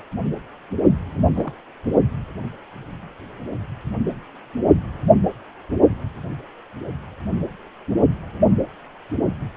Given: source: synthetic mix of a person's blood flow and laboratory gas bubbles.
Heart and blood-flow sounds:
Doppler ultrasound of blood flow; precordium
1.11-1.32 s: bubbles
1.35-1.52 s: bubbles
From the record:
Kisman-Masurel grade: 111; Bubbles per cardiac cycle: 1 to 2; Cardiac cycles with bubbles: 1 to 10%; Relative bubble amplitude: barely perceptible (0.100 to 0.250); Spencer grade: 1 (occasional bubble signal discernible with the cardiac motion signal, with majority of cardiac periods free of bubbles); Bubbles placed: only in the low amplitude regions of the cardiac cycle

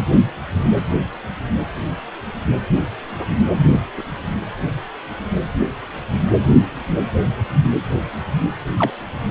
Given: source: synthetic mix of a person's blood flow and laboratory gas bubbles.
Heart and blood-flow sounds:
Doppler ultrasound of blood flow; precordium
3.56-3.67 s: bubbles
3.97-4.02 s: bubbles
8.77-8.90 s: bubbles
From the record:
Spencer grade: 2 (many but less than half of the cardiac periods contain bubble signals, singularly or in groups); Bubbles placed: anywhere in the cardiac cycle

